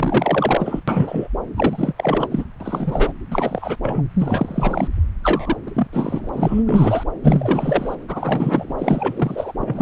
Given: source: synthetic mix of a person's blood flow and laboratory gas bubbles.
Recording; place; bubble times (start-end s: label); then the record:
Doppler ultrasound of blood flow; subclavian vein
0.00-0.80 s: bubbles
0.88-1.28 s: bubbles
1.56-1.93 s: bubbles
1.97-2.44 s: bubbles
2.60-3.12 s: bubbles
3.30-3.76 s: bubbles
3.82-4.03 s: bubbles
4.19-4.88 s: bubbles
5.23-5.57 s: bubbles
5.66-5.71 s: bubbles
5.74-5.87 s: bubbles
5.93-6.29 s: bubbles
6.33-6.63 s: bubbles
6.66-7.04 s: bubbles
7.24-7.96 s: bubbles
8.09-8.75 s: bubbles
8.78-9.53 s: bubbles
9.60-9.82 s: bubbles
From the record:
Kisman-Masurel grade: 343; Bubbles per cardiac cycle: rolling drumbeat, 9 or more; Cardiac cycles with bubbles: 100%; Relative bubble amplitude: loud (0.450 to 0.775); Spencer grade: 3 (all of the cardiac periods contain showers or single bubble signals, but not dominating or overriding the cardiac motion signals); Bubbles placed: anywhere in the cardiac cycle